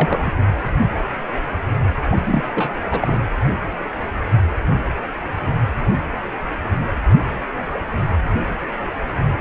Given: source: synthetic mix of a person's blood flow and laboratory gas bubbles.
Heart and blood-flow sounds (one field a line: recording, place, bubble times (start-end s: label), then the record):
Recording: Doppler ultrasound of blood flow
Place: precordium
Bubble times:
0.00-0.31 s: bubbles
2.12-2.44 s: bubbles
2.55-2.71 s: bubbles
2.91-3.17 s: bubbles
From the record:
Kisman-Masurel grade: 222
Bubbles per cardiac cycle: several, 3 to 8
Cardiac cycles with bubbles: 10 to 50%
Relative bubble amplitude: moderate (0.250 to 0.450)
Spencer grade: 2 (many but less than half of the cardiac periods contain bubble signals, singularly or in groups)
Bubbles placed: anywhere in the cardiac cycle